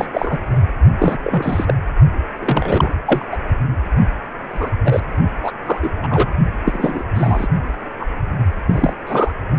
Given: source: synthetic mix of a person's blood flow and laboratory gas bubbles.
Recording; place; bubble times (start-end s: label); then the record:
Doppler ultrasound of blood flow; precordium
0.00-0.07 s: bubbles
0.13-0.59 s: bubbles
0.98-1.17 s: bubbles
1.23-1.75 s: bubbles
2.41-2.90 s: bubbles
3.05-3.24 s: bubbles
3.31-3.37 s: bubbles
4.51-4.70 s: bubbles
4.84-5.01 s: bubbles
5.42-5.52 s: bubbles
5.66-5.79 s: bubbles
5.82-5.91 s: bubbles
6.03-6.08 s: bubbles
6.10-6.29 s: bubbles
6.65-7.04 s: bubbles
7.15-7.48 s: bubbles
7.99-8.05 s: bubbles
8.68-8.93 s: bubbles
9.06-9.31 s: bubbles
From the record:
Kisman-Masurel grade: 243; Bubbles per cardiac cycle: several, 3 to 8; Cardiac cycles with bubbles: 100%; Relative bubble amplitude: loud (0.450 to 0.775); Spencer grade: 3 (all of the cardiac periods contain showers or single bubble signals, but not dominating or overriding the cardiac motion signals); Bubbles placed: only in the low amplitude regions of the cardiac cycle